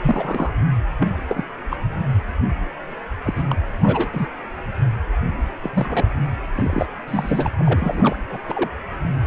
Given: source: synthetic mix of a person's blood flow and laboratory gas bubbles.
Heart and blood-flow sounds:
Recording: Doppler ultrasound of blood flow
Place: precordium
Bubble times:
0.02-0.51 s: bubbles
0.99-1.10 s: bubbles
1.29-1.44 s: bubbles
1.70-1.77 s: bubbles
3.25-3.42 s: bubbles
3.50-3.57 s: bubbles
3.82-4.26 s: bubbles
5.63-5.70 s: bubbles
5.73-6.08 s: bubbles
6.55-6.86 s: bubbles
7.08-7.48 s: bubbles
7.59-8.16 s: bubbles
8.30-8.38 s: bubbles
8.49-8.69 s: bubbles
From the record:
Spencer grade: 3 (all of the cardiac periods contain showers or single bubble signals, but not dominating or overriding the cardiac motion signals)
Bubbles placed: anywhere in the cardiac cycle

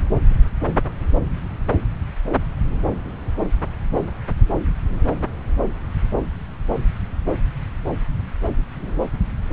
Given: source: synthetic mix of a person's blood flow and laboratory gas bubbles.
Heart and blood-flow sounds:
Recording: Doppler ultrasound of blood flow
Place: subclavian vein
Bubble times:
no bubbles
From the record:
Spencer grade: 0 (complete lack of bubble signals)

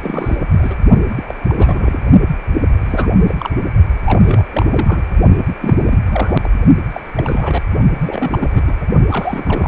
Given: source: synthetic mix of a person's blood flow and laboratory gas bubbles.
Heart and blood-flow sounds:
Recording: Doppler ultrasound of blood flow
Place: precordium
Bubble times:
0.00-0.36 s: bubbles
0.52-0.75 s: bubbles
1.09-1.23 s: bubbles
1.27-1.34 s: bubbles
1.48-1.99 s: bubbles
2.81-3.10 s: bubbles
3.28-3.35 s: bubbles
3.38-3.50 s: bubbles
4.04-4.43 s: bubbles
4.52-4.66 s: bubbles
4.70-5.03 s: bubbles
5.61-5.83 s: bubbles
5.86-5.98 s: bubbles
6.07-6.36 s: bubbles
6.43-6.50 s: bubbles
6.90-7.00 s: bubbles
7.16-7.62 s: bubbles
8.00-8.76 s: bubbles
8.80-8.84 s: bubbles
9.09-9.68 s: bubbles
From the record:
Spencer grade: 3 (all of the cardiac periods contain showers or single bubble signals, but not dominating or overriding the cardiac motion signals)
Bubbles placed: only in the low amplitude regions of the cardiac cycle

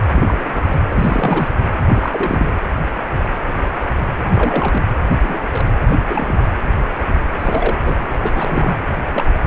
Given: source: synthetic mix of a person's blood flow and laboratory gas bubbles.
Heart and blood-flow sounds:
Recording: Doppler ultrasound of blood flow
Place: precordium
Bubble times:
0.16-0.78 s: bubbles
0.89-1.60 s: bubbles
1.88-2.60 s: bubbles
4.34-4.88 s: bubbles
5.23-5.46 s: bubbles
5.52-5.76 s: bubbles
5.88-5.99 s: bubbles
6.09-6.35 s: bubbles
7.37-8.02 s: bubbles
8.12-8.32 s: bubbles
8.34-8.77 s: bubbles
9.05-9.24 s: bubbles
9.35-9.40 s: bubbles
From the record:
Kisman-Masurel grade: 232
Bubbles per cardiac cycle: several, 3 to 8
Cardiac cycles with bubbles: 50 to 99%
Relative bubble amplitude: moderate (0.250 to 0.450)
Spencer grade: 3 (all of the cardiac periods contain showers or single bubble signals, but not dominating or overriding the cardiac motion signals)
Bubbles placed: anywhere in the cardiac cycle

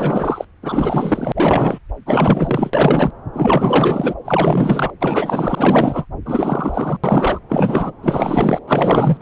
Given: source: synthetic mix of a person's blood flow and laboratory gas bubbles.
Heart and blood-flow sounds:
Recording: Doppler ultrasound of blood flow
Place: subclavian vein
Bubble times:
0.00-0.45 s: bubbles
0.62-1.78 s: bubbles
2.05-2.71 s: bubbles
2.73-3.11 s: bubbles
3.33-4.15 s: bubbles
4.25-4.92 s: bubbles
5.00-6.06 s: bubbles
6.25-6.98 s: bubbles
7.04-7.39 s: bubbles
7.49-7.92 s: bubbles
8.02-8.60 s: bubbles
8.67-9.17 s: bubbles
9.20-9.22 s: bubbles
From the record:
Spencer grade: 4 (maximum detectable bubble signal sounding continuously throughout systole and diastole of every cardiac period, and overriding the amplitude of the normal cardiac signals)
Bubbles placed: anywhere in the cardiac cycle

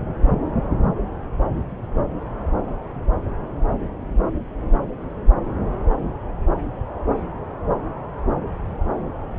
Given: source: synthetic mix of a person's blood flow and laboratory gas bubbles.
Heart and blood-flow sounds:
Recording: Doppler ultrasound of blood flow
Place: subclavian vein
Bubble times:
no bubbles
From the record:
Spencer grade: 0 (complete lack of bubble signals)

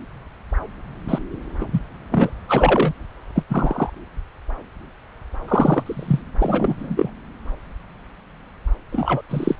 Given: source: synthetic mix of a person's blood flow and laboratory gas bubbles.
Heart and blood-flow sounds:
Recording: Doppler ultrasound of blood flow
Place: subclavian vein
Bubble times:
1.08-1.18 s: bubbles
1.60-1.66 s: bubbles
1.72-1.80 s: bubbles
2.11-2.31 s: bubbles
2.48-2.93 s: bubbles
3.35-3.43 s: bubbles
3.49-3.90 s: bubbles
5.47-6.22 s: bubbles
6.39-7.10 s: bubbles
8.92-9.21 s: bubbles
9.29-9.55 s: bubbles
From the record:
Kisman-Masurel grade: 233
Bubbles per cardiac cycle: several, 3 to 8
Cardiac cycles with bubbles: 50 to 99%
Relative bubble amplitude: loud (0.450 to 0.775)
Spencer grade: 3 (all of the cardiac periods contain showers or single bubble signals, but not dominating or overriding the cardiac motion signals)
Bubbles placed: anywhere in the cardiac cycle

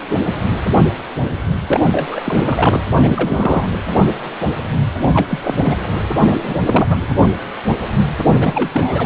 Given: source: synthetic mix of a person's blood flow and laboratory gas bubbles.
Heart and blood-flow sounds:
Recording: Doppler ultrasound of blood flow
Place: precordium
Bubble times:
1.66-1.80 s: bubbles
1.86-2.21 s: bubbles
2.24-2.82 s: bubbles
2.93-3.66 s: bubbles
5.03-5.27 s: bubbles
5.29-5.39 s: bubbles
5.42-5.79 s: bubbles
6.20-6.28 s: bubbles
6.31-6.58 s: bubbles
6.66-7.06 s: bubbles
8.33-8.69 s: bubbles
8.71-9.06 s: bubbles
From the record:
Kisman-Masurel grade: 332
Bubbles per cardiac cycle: rolling drumbeat, 9 or more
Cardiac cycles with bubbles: 50 to 99%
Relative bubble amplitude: moderate (0.250 to 0.450)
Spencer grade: 3 (all of the cardiac periods contain showers or single bubble signals, but not dominating or overriding the cardiac motion signals)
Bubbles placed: anywhere in the cardiac cycle

